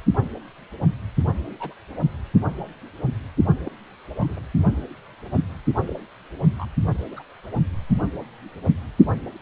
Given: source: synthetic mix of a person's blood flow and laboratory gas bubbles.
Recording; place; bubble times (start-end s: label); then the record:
Doppler ultrasound of blood flow; precordium
1.60-1.74 s: bubbles
3.67-3.71 s: bubbles
4.20-4.40 s: bubbles
5.88-5.93 s: bubbles
6.58-6.66 s: bubbles
7.10-7.22 s: bubbles
From the record:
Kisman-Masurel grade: 121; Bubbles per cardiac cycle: 1 to 2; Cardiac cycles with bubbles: 10 to 50%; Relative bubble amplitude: barely perceptible (0.100 to 0.250); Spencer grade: 2 (many but less than half of the cardiac periods contain bubble signals, singularly or in groups); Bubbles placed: only in the low amplitude regions of the cardiac cycle